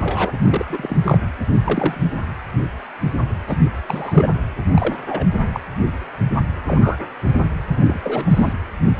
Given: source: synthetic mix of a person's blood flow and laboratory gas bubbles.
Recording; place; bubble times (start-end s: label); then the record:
Doppler ultrasound of blood flow; precordium
0.02-0.32 s: bubbles
0.45-0.66 s: bubbles
0.69-0.96 s: bubbles
1.04-1.18 s: bubbles
1.64-2.14 s: bubbles
3.47-3.60 s: bubbles
3.86-4.29 s: bubbles
4.73-4.99 s: bubbles
5.09-5.27 s: bubbles
5.53-5.60 s: bubbles
6.66-6.97 s: bubbles
7.76-7.99 s: bubbles
8.03-8.53 s: bubbles
From the record:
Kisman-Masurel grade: 232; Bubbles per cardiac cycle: several, 3 to 8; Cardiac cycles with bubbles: 50 to 99%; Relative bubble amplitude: moderate (0.250 to 0.450); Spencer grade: 3 (all of the cardiac periods contain showers or single bubble signals, but not dominating or overriding the cardiac motion signals); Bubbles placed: anywhere in the cardiac cycle